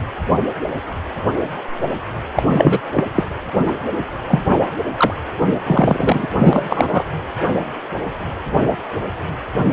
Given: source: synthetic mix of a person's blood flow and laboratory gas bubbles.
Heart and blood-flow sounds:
Doppler ultrasound of blood flow; precordium
2.35-2.81 s: bubbles
2.94-3.06 s: bubbles
3.15-3.23 s: bubbles
3.67-3.73 s: bubbles
4.28-4.42 s: bubbles
4.45-4.67 s: bubbles
4.97-5.14 s: bubbles
5.66-6.28 s: bubbles
6.39-7.05 s: bubbles
From the record:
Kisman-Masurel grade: 223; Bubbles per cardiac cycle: several, 3 to 8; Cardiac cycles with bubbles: 10 to 50%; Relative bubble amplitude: loud (0.450 to 0.775); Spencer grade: 2 (many but less than half of the cardiac periods contain bubble signals, singularly or in groups); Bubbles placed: anywhere in the cardiac cycle

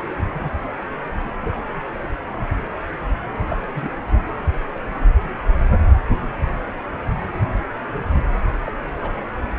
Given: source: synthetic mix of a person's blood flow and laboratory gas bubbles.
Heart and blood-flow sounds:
Doppler ultrasound of blood flow; precordium
0.33-0.49 s: bubbles
1.20-1.34 s: bubbles
1.42-1.61 s: bubbles
3.50-3.58 s: bubbles
3.73-3.91 s: bubbles
8.64-8.72 s: bubbles
9.02-9.12 s: bubbles
From the record:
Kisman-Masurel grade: 121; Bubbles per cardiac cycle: 1 to 2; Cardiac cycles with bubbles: 10 to 50%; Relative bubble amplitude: barely perceptible (0.100 to 0.250); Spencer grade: 2 (many but less than half of the cardiac periods contain bubble signals, singularly or in groups); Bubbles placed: anywhere in the cardiac cycle

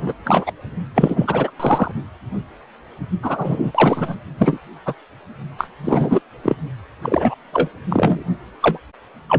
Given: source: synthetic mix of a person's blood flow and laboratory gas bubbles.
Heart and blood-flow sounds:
Doppler ultrasound of blood flow; precordium
0.00-0.12 s: bubbles
0.25-0.52 s: bubbles
0.95-1.51 s: bubbles
1.60-1.92 s: bubbles
3.22-3.72 s: bubbles
3.74-4.15 s: bubbles
4.38-4.59 s: bubbles
4.86-4.94 s: bubbles
5.57-5.69 s: bubbles
5.84-6.20 s: bubbles
6.43-6.55 s: bubbles
7.02-7.34 s: bubbles
7.52-7.68 s: bubbles
7.90-8.24 s: bubbles
8.62-8.79 s: bubbles
9.29-9.39 s: bubbles
From the record:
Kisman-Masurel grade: 233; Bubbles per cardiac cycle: several, 3 to 8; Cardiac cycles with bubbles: 50 to 99%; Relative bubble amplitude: loud (0.450 to 0.775); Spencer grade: 3 (all of the cardiac periods contain showers or single bubble signals, but not dominating or overriding the cardiac motion signals); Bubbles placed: only in the low amplitude regions of the cardiac cycle

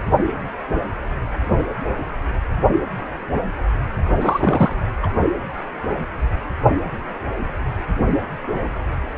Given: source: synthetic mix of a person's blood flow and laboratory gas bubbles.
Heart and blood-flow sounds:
Doppler ultrasound of blood flow; precordium
4.21-4.75 s: bubbles
5.03-5.12 s: bubbles
From the record:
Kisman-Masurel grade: 213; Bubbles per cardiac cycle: several, 3 to 8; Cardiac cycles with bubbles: 1 to 10%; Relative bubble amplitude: loud (0.450 to 0.775); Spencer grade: 1 (occasional bubble signal discernible with the cardiac motion signal, with majority of cardiac periods free of bubbles); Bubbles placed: only in the low amplitude regions of the cardiac cycle

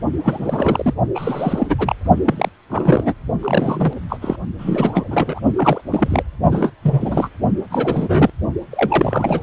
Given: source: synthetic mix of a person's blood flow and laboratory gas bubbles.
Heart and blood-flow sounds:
Doppler ultrasound of blood flow; precordium
0.23-0.94 s: bubbles
1.15-1.75 s: bubbles
1.78-1.96 s: bubbles
2.24-2.49 s: bubbles
2.69-3.13 s: bubbles
3.42-3.94 s: bubbles
4.09-4.19 s: bubbles
4.21-4.36 s: bubbles
4.58-5.40 s: bubbles
5.57-5.82 s: bubbles
5.91-6.23 s: bubbles
6.50-6.71 s: bubbles
6.83-7.29 s: bubbles
7.71-8.30 s: bubbles
8.71-9.43 s: bubbles
From the record:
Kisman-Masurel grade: 342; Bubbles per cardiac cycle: rolling drumbeat, 9 or more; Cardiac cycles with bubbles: 100%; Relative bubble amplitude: moderate (0.250 to 0.450); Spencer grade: 3 (all of the cardiac periods contain showers or single bubble signals, but not dominating or overriding the cardiac motion signals); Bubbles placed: only in the low amplitude regions of the cardiac cycle

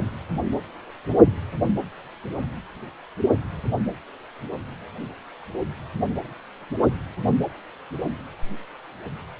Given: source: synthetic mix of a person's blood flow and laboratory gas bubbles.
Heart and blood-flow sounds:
Doppler ultrasound of blood flow; precordium
no bubbles
From the record:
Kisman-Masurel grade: 000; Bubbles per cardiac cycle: 0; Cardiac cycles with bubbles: 0%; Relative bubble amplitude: no bubbles discernible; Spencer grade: 0 (complete lack of bubble signals)

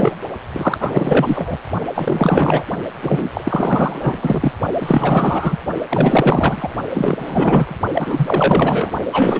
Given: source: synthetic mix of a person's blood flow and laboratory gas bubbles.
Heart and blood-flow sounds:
Doppler ultrasound of blood flow; precordium
0.00-0.15 s: bubbles
0.53-1.58 s: bubbles
1.81-1.85 s: bubbles
1.94-2.65 s: bubbles
3.02-3.30 s: bubbles
3.34-4.52 s: bubbles
4.80-5.58 s: bubbles
5.89-6.76 s: bubbles
6.94-7.76 s: bubbles
7.94-8.91 s: bubbles
9.12-9.40 s: bubbles
From the record:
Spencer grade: 4 (maximum detectable bubble signal sounding continuously throughout systole and diastole of every cardiac period, and overriding the amplitude of the normal cardiac signals); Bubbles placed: only in the low amplitude regions of the cardiac cycle

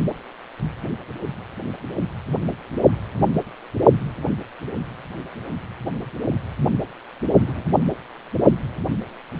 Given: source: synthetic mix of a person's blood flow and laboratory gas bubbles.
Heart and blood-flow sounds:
Doppler ultrasound of blood flow; precordium
2.80-2.95 s: bubbles
7.39-7.63 s: bubbles
From the record:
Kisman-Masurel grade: 121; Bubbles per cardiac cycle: 1 to 2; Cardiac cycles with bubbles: 10 to 50%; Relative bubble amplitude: barely perceptible (0.100 to 0.250); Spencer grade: 2 (many but less than half of the cardiac periods contain bubble signals, singularly or in groups); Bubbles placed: only in the low amplitude regions of the cardiac cycle

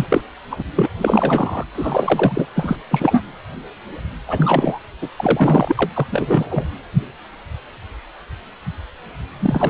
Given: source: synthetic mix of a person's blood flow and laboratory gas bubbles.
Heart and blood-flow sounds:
Doppler ultrasound of blood flow; precordium
0.00-0.07 s: bubbles
0.10-0.21 s: bubbles
0.51-0.64 s: bubbles
0.75-0.89 s: bubbles
0.98-1.64 s: bubbles
1.74-2.46 s: bubbles
2.55-2.77 s: bubbles
2.90-3.21 s: bubbles
4.27-4.79 s: bubbles
5.01-5.09 s: bubbles
5.17-6.07 s: bubbles
6.11-6.65 s: bubbles
9.39-9.70 s: bubbles
From the record:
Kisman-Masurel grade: 333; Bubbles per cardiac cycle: rolling drumbeat, 9 or more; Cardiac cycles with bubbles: 50 to 99%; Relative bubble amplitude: loud (0.450 to 0.775); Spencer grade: 3 (all of the cardiac periods contain showers or single bubble signals, but not dominating or overriding the cardiac motion signals); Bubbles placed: anywhere in the cardiac cycle

